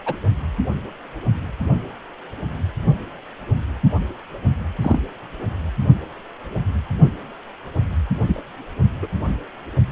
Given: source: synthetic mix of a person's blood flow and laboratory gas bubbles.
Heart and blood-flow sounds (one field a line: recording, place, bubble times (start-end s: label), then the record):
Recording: Doppler ultrasound of blood flow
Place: precordium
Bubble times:
0.06-0.14 s: bubbles
4.82-5.00 s: bubbles
8.27-8.41 s: bubbles
9.02-9.07 s: bubbles
From the record:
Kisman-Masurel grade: 122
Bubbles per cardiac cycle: 1 to 2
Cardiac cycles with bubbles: 10 to 50%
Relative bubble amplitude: moderate (0.250 to 0.450)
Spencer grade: 2 (many but less than half of the cardiac periods contain bubble signals, singularly or in groups)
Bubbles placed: only in the low amplitude regions of the cardiac cycle